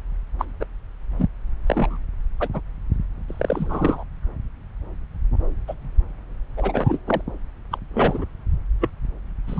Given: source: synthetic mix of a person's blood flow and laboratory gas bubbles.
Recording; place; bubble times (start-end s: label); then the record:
Doppler ultrasound of blood flow; subclavian vein
0.39-0.45 s: bubbles
0.60-0.66 s: bubbles
1.19-1.29 s: bubbles
1.67-1.97 s: bubbles
2.40-2.49 s: bubbles
2.53-2.60 s: bubbles
3.28-4.03 s: bubbles
5.67-5.74 s: bubbles
6.57-6.98 s: bubbles
7.07-7.21 s: bubbles
7.71-7.78 s: bubbles
7.93-8.25 s: bubbles
8.80-8.90 s: bubbles
9.47-9.60 s: bubbles
From the record:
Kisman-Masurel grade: 232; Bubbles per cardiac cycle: several, 3 to 8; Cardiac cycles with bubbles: 50 to 99%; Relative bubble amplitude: moderate (0.250 to 0.450); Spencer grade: 3 (all of the cardiac periods contain showers or single bubble signals, but not dominating or overriding the cardiac motion signals); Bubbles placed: anywhere in the cardiac cycle